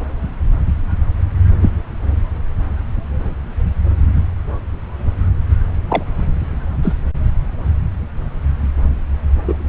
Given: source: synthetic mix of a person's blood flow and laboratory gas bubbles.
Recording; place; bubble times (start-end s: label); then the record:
Doppler ultrasound of blood flow; subclavian vein
1.61-1.70 s: bubbles
5.88-6.03 s: bubbles
6.83-6.95 s: bubbles
9.47-9.56 s: bubbles
From the record:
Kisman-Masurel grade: 123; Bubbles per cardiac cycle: 1 to 2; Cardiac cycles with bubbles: 10 to 50%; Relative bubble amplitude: loud (0.450 to 0.775); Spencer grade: 2 (many but less than half of the cardiac periods contain bubble signals, singularly or in groups); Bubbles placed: anywhere in the cardiac cycle